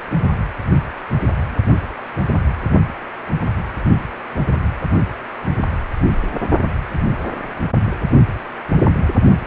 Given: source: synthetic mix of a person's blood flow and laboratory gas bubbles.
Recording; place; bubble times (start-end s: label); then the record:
Doppler ultrasound of blood flow; precordium
no bubbles
From the record:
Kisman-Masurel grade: 000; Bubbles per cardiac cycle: 0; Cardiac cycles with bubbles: 0%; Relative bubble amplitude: no bubbles discernible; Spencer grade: 0 (complete lack of bubble signals)